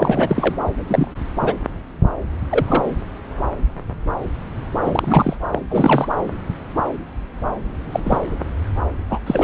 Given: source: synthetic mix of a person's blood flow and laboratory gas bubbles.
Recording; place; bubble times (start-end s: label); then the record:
Doppler ultrasound of blood flow; subclavian vein
0.00-0.55 s: bubbles
0.87-1.08 s: bubbles
1.40-1.54 s: bubbles
2.48-2.94 s: bubbles
4.85-5.35 s: bubbles
5.51-5.62 s: bubbles
5.70-6.08 s: bubbles
7.92-8.00 s: bubbles
8.05-8.18 s: bubbles
9.10-9.20 s: bubbles
9.26-9.44 s: bubbles
From the record:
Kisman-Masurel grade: 223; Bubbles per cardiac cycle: several, 3 to 8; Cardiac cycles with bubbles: 10 to 50%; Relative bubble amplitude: loud (0.450 to 0.775); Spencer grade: 2 (many but less than half of the cardiac periods contain bubble signals, singularly or in groups); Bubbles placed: anywhere in the cardiac cycle